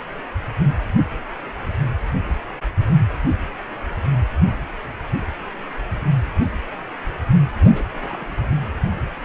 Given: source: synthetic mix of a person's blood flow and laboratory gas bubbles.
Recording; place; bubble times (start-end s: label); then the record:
Doppler ultrasound of blood flow; precordium
7.61-7.87 s: bubbles
7.90-8.29 s: bubbles
From the record:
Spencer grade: 1 (occasional bubble signal discernible with the cardiac motion signal, with majority of cardiac periods free of bubbles); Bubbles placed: anywhere in the cardiac cycle